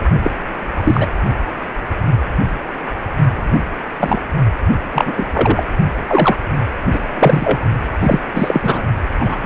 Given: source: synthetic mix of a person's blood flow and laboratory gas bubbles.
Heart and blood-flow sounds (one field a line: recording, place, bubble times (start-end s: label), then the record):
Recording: Doppler ultrasound of blood flow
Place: precordium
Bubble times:
0.23-0.31 s: bubbles
0.79-1.08 s: bubbles
3.35-3.61 s: bubbles
4.00-4.22 s: bubbles
4.93-5.13 s: bubbles
5.17-5.25 s: bubbles
5.33-5.71 s: bubbles
6.07-6.37 s: bubbles
6.92-7.00 s: bubbles
7.13-7.59 s: bubbles
8.00-8.20 s: bubbles
8.33-8.82 s: bubbles
9.16-9.36 s: bubbles
9.42-9.46 s: bubbles
From the record:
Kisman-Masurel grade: 233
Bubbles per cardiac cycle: several, 3 to 8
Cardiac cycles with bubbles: 50 to 99%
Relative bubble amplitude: loud (0.450 to 0.775)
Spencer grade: 3 (all of the cardiac periods contain showers or single bubble signals, but not dominating or overriding the cardiac motion signals)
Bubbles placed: only in the low amplitude regions of the cardiac cycle